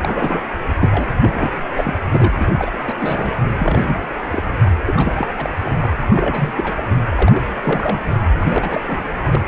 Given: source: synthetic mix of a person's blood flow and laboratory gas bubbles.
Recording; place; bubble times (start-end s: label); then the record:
Doppler ultrasound of blood flow; precordium
0.02-0.42 s: bubbles
0.79-1.06 s: bubbles
1.22-1.30 s: bubbles
1.34-1.60 s: bubbles
1.76-1.94 s: bubbles
2.10-2.52 s: bubbles
2.59-2.71 s: bubbles
2.86-2.93 s: bubbles
3.00-3.43 s: bubbles
3.57-3.96 s: bubbles
4.31-4.42 s: bubbles
4.85-5.27 s: bubbles
5.37-5.53 s: bubbles
5.64-5.71 s: bubbles
5.80-5.96 s: bubbles
6.10-6.52 s: bubbles
6.55-6.83 s: bubbles
7.09-7.43 s: bubbles
7.62-8.01 s: bubbles
8.35-8.81 s: bubbles
8.87-9.04 s: bubbles
9.32-9.41 s: bubbles
From the record:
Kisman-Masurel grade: 342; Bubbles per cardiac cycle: rolling drumbeat, 9 or more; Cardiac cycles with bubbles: 100%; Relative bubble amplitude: moderate (0.250 to 0.450); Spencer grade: 3 (all of the cardiac periods contain showers or single bubble signals, but not dominating or overriding the cardiac motion signals); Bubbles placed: anywhere in the cardiac cycle